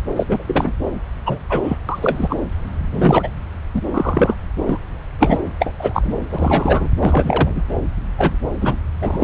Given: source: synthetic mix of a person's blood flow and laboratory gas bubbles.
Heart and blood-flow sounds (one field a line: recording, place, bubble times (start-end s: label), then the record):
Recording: Doppler ultrasound of blood flow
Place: subclavian vein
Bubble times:
0.16-0.26 s: bubbles
0.29-0.43 s: bubbles
0.47-0.74 s: bubbles
1.26-1.38 s: bubbles
1.49-1.77 s: bubbles
1.88-2.36 s: bubbles
2.92-3.29 s: bubbles
3.74-3.83 s: bubbles
3.94-4.35 s: bubbles
4.65-4.79 s: bubbles
5.18-5.39 s: bubbles
5.59-5.73 s: bubbles
5.79-6.13 s: bubbles
6.32-6.88 s: bubbles
6.96-7.62 s: bubbles
8.18-8.36 s: bubbles
8.61-8.76 s: bubbles
9.01-9.24 s: bubbles
From the record:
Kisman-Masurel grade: 243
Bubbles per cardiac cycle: several, 3 to 8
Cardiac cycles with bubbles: 100%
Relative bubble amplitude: loud (0.450 to 0.775)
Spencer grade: 3 (all of the cardiac periods contain showers or single bubble signals, but not dominating or overriding the cardiac motion signals)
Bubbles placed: anywhere in the cardiac cycle